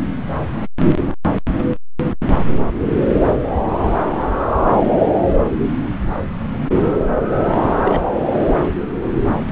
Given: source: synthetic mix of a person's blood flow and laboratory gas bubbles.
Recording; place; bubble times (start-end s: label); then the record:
Doppler ultrasound of blood flow; subclavian vein
7.84-8.02 s: bubbles
From the record:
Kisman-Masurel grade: 123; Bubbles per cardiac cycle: 1 to 2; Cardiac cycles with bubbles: 10 to 50%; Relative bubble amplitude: loud (0.450 to 0.775); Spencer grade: 2 (many but less than half of the cardiac periods contain bubble signals, singularly or in groups); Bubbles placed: anywhere in the cardiac cycle